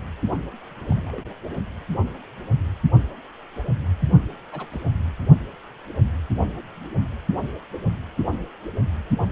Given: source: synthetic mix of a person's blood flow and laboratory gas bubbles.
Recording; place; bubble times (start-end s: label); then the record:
Doppler ultrasound of blood flow; precordium
0.89-1.22 s: bubbles
4.52-4.66 s: bubbles
4.71-4.81 s: bubbles
From the record:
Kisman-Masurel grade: 121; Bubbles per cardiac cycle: 1 to 2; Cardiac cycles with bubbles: 10 to 50%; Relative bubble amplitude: barely perceptible (0.100 to 0.250); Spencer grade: 2 (many but less than half of the cardiac periods contain bubble signals, singularly or in groups); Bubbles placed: only in the low amplitude regions of the cardiac cycle